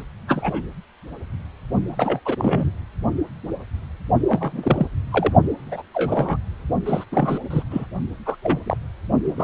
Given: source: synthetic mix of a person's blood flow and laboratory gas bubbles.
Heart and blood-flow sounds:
Doppler ultrasound of blood flow; precordium
0.00-0.03 s: bubbles
0.27-0.62 s: bubbles
1.87-2.20 s: bubbles
2.25-2.35 s: bubbles
2.38-2.71 s: bubbles
4.26-4.87 s: bubbles
5.11-5.32 s: bubbles
5.66-5.83 s: bubbles
5.94-6.37 s: bubbles
6.85-7.04 s: bubbles
7.12-7.39 s: bubbles
7.50-7.62 s: bubbles
7.71-7.86 s: bubbles
8.26-8.37 s: bubbles
8.43-8.60 s: bubbles
8.63-8.77 s: bubbles
9.24-9.43 s: bubbles
From the record:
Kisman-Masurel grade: 232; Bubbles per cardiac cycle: several, 3 to 8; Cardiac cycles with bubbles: 50 to 99%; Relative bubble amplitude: moderate (0.250 to 0.450); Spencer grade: 3 (all of the cardiac periods contain showers or single bubble signals, but not dominating or overriding the cardiac motion signals); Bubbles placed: only in the low amplitude regions of the cardiac cycle

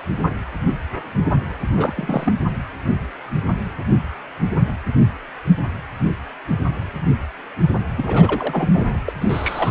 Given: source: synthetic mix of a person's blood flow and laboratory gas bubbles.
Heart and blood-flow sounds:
Doppler ultrasound of blood flow; precordium
1.77-2.33 s: bubbles
7.97-8.85 s: bubbles
9.08-9.12 s: bubbles
9.21-9.71 s: bubbles
From the record:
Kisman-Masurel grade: 222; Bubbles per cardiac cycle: several, 3 to 8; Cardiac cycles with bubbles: 10 to 50%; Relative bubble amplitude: moderate (0.250 to 0.450); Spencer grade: 2 (many but less than half of the cardiac periods contain bubble signals, singularly or in groups); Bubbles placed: anywhere in the cardiac cycle

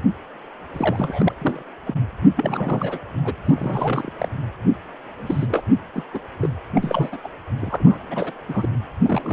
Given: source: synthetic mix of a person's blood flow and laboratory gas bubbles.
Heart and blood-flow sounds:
Doppler ultrasound of blood flow; precordium
0.73-1.32 s: bubbles
1.41-1.62 s: bubbles
1.86-1.95 s: bubbles
2.37-3.00 s: bubbles
3.24-3.35 s: bubbles
3.45-4.11 s: bubbles
4.19-4.29 s: bubbles
5.16-5.62 s: bubbles
5.94-6.03 s: bubbles
6.14-6.20 s: bubbles
6.40-6.50 s: bubbles
6.75-7.20 s: bubbles
7.24-7.28 s: bubbles
7.59-8.33 s: bubbles
8.48-8.76 s: bubbles
9.03-9.33 s: bubbles
From the record:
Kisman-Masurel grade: 342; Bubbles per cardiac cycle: rolling drumbeat, 9 or more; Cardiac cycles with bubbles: 100%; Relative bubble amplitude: moderate (0.250 to 0.450); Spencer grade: 3 (all of the cardiac periods contain showers or single bubble signals, but not dominating or overriding the cardiac motion signals); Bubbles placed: anywhere in the cardiac cycle

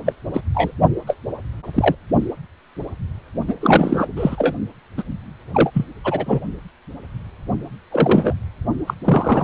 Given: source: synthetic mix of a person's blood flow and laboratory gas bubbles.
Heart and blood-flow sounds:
Doppler ultrasound of blood flow; precordium
0.05-0.13 s: bubbles
0.34-0.41 s: bubbles
0.54-0.72 s: bubbles
1.07-1.16 s: bubbles
1.73-1.95 s: bubbles
3.47-3.55 s: bubbles
3.60-4.07 s: bubbles
4.16-4.54 s: bubbles
4.98-5.03 s: bubbles
5.54-5.71 s: bubbles
5.74-5.86 s: bubbles
6.04-6.40 s: bubbles
7.91-8.34 s: bubbles
8.87-8.94 s: bubbles
9.04-9.44 s: bubbles
From the record:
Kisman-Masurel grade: 233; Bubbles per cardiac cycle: several, 3 to 8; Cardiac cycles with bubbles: 50 to 99%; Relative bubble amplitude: loud (0.450 to 0.775); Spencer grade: 3 (all of the cardiac periods contain showers or single bubble signals, but not dominating or overriding the cardiac motion signals); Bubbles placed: only in the low amplitude regions of the cardiac cycle

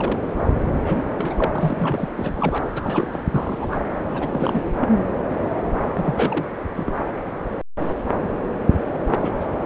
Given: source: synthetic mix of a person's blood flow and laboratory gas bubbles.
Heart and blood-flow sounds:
Doppler ultrasound of blood flow; subclavian vein
0.00-0.20 s: bubbles
0.80-1.03 s: bubbles
1.17-2.09 s: bubbles
2.17-2.65 s: bubbles
2.76-3.28 s: bubbles
3.31-3.81 s: bubbles
4.12-4.65 s: bubbles
4.81-4.89 s: bubbles
5.96-6.46 s: bubbles
6.76-6.93 s: bubbles
9.11-9.34 s: bubbles
9.40-9.46 s: bubbles
From the record:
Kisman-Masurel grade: 232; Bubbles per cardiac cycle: several, 3 to 8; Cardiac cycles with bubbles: 50 to 99%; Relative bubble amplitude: moderate (0.250 to 0.450); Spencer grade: 3 (all of the cardiac periods contain showers or single bubble signals, but not dominating or overriding the cardiac motion signals); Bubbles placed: anywhere in the cardiac cycle

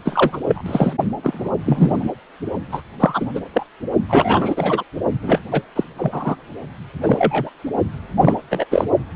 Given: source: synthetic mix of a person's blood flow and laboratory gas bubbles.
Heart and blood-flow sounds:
Doppler ultrasound of blood flow; precordium
0.05-0.40 s: bubbles
0.47-0.63 s: bubbles
0.66-0.93 s: bubbles
1.23-1.51 s: bubbles
1.65-2.09 s: bubbles
2.71-2.81 s: bubbles
2.99-3.27 s: bubbles
3.34-3.40 s: bubbles
3.53-3.66 s: bubbles
4.08-4.83 s: bubbles
5.22-5.41 s: bubbles
5.51-5.62 s: bubbles
5.75-5.84 s: bubbles
5.98-6.35 s: bubbles
7.01-7.50 s: bubbles
8.16-8.37 s: bubbles
8.51-8.66 s: bubbles
8.71-8.85 s: bubbles
From the record:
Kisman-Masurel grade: 233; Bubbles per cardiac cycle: several, 3 to 8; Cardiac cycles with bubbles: 50 to 99%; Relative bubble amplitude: loud (0.450 to 0.775); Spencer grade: 3 (all of the cardiac periods contain showers or single bubble signals, but not dominating or overriding the cardiac motion signals); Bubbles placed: only in the low amplitude regions of the cardiac cycle

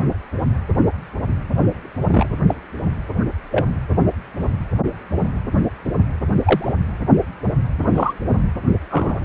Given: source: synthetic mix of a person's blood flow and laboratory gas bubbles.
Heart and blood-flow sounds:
Doppler ultrasound of blood flow; precordium
2.10-2.26 s: bubbles
2.47-2.54 s: bubbles
3.50-3.67 s: bubbles
6.44-6.73 s: bubbles
7.94-8.13 s: bubbles
8.89-9.21 s: bubbles
From the record:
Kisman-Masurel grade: 122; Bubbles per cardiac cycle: 1 to 2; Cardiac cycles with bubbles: 10 to 50%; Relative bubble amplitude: moderate (0.250 to 0.450); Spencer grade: 2 (many but less than half of the cardiac periods contain bubble signals, singularly or in groups); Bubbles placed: anywhere in the cardiac cycle

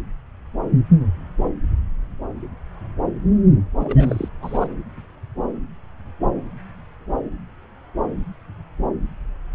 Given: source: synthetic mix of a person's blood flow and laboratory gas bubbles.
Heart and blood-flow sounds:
Doppler ultrasound of blood flow; subclavian vein
3.80-4.29 s: bubbles
4.40-4.67 s: bubbles
From the record:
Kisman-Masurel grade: 222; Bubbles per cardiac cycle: several, 3 to 8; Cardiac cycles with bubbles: 10 to 50%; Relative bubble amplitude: moderate (0.250 to 0.450); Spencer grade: 2 (many but less than half of the cardiac periods contain bubble signals, singularly or in groups); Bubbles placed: anywhere in the cardiac cycle

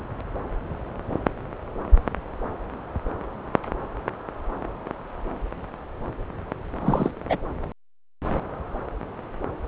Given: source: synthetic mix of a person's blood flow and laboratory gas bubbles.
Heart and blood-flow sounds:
Doppler ultrasound of blood flow; subclavian vein
6.82-7.11 s: bubbles
7.29-7.37 s: bubbles
From the record:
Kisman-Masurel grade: 212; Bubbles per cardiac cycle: several, 3 to 8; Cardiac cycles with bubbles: 1 to 10%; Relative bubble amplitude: moderate (0.250 to 0.450); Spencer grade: 1 (occasional bubble signal discernible with the cardiac motion signal, with majority of cardiac periods free of bubbles); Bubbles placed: anywhere in the cardiac cycle

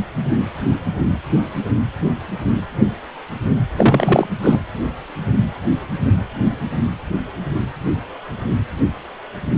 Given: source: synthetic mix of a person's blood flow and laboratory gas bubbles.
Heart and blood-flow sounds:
Doppler ultrasound of blood flow; precordium
3.75-4.27 s: bubbles
4.42-4.58 s: bubbles
From the record:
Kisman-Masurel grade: 213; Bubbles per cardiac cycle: several, 3 to 8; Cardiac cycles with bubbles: 1 to 10%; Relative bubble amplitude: loud (0.450 to 0.775); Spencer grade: 1 (occasional bubble signal discernible with the cardiac motion signal, with majority of cardiac periods free of bubbles); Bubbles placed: anywhere in the cardiac cycle

